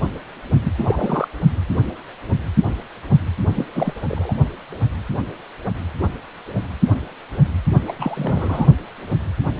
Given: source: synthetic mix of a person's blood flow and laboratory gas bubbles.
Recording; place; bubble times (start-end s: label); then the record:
Doppler ultrasound of blood flow; precordium
0.63-0.72 s: bubbles
0.78-1.28 s: bubbles
3.54-3.66 s: bubbles
3.74-3.94 s: bubbles
4.08-4.33 s: bubbles
7.86-7.93 s: bubbles
7.99-8.67 s: bubbles
From the record:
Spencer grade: 2 (many but less than half of the cardiac periods contain bubble signals, singularly or in groups); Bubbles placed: only in the low amplitude regions of the cardiac cycle